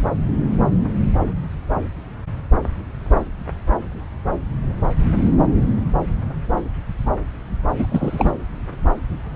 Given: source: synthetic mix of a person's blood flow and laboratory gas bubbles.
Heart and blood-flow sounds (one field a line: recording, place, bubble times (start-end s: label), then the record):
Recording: Doppler ultrasound of blood flow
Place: subclavian vein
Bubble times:
7.78-7.87 s: bubbles
7.89-8.31 s: bubbles
From the record:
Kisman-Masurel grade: 212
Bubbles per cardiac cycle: several, 3 to 8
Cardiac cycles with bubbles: 1 to 10%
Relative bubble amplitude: moderate (0.250 to 0.450)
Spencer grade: 1 (occasional bubble signal discernible with the cardiac motion signal, with majority of cardiac periods free of bubbles)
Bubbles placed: anywhere in the cardiac cycle